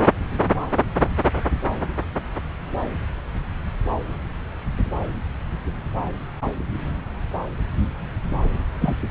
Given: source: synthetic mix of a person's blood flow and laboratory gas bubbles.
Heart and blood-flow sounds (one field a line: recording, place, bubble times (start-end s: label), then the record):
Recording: Doppler ultrasound of blood flow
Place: subclavian vein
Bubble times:
8.80-8.94 s: bubbles
From the record:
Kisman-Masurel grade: 212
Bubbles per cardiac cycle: several, 3 to 8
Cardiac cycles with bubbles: 1 to 10%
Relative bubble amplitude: moderate (0.250 to 0.450)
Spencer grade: 1 (occasional bubble signal discernible with the cardiac motion signal, with majority of cardiac periods free of bubbles)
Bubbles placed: anywhere in the cardiac cycle